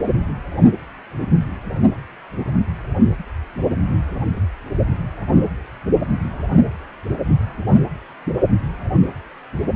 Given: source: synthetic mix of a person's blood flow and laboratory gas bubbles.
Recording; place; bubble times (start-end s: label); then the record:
Doppler ultrasound of blood flow; precordium
no bubbles
From the record:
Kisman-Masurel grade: 000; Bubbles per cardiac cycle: 0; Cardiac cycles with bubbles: 0%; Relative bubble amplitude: no bubbles discernible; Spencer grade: 0 (complete lack of bubble signals)